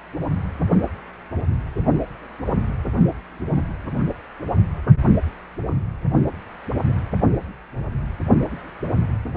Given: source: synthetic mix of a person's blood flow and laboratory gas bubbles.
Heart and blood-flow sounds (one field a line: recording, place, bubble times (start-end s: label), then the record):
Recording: Doppler ultrasound of blood flow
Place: precordium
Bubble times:
no bubbles
From the record:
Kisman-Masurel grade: 000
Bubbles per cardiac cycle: 0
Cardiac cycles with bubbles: 0%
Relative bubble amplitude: no bubbles discernible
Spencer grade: 0 (complete lack of bubble signals)